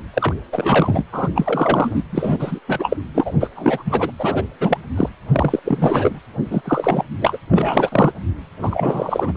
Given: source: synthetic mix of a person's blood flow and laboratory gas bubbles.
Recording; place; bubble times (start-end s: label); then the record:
Doppler ultrasound of blood flow; precordium
0.14-0.34 s: bubbles
0.52-1.03 s: bubbles
1.12-1.29 s: bubbles
1.35-2.03 s: bubbles
2.10-2.59 s: bubbles
2.68-2.96 s: bubbles
3.14-3.34 s: bubbles
3.40-3.50 s: bubbles
3.56-4.12 s: bubbles
4.19-4.45 s: bubbles
4.61-4.78 s: bubbles
4.96-5.09 s: bubbles
5.32-5.59 s: bubbles
5.65-6.19 s: bubbles
6.50-6.62 s: bubbles
6.64-7.03 s: bubbles
7.21-7.38 s: bubbles
7.50-7.89 s: bubbles
7.92-8.12 s: bubbles
8.62-9.37 s: bubbles
From the record:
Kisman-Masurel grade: 343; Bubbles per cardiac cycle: rolling drumbeat, 9 or more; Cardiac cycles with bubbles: 100%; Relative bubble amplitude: loud (0.450 to 0.775); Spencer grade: 3 (all of the cardiac periods contain showers or single bubble signals, but not dominating or overriding the cardiac motion signals); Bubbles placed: anywhere in the cardiac cycle